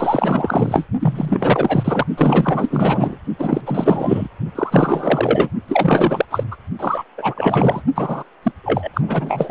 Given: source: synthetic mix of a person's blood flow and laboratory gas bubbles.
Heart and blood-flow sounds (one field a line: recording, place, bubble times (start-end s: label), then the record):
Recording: Doppler ultrasound of blood flow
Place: precordium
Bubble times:
0.00-0.86 s: bubbles
1.00-2.06 s: bubbles
2.17-3.17 s: bubbles
3.39-4.28 s: bubbles
4.55-5.50 s: bubbles
5.67-6.25 s: bubbles
6.30-6.43 s: bubbles
6.51-6.56 s: bubbles
6.79-7.04 s: bubbles
7.17-7.82 s: bubbles
7.95-8.23 s: bubbles
8.43-8.52 s: bubbles
8.63-8.89 s: bubbles
8.93-9.51 s: bubbles
From the record:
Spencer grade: 4 (maximum detectable bubble signal sounding continuously throughout systole and diastole of every cardiac period, and overriding the amplitude of the normal cardiac signals)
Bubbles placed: only in the low amplitude regions of the cardiac cycle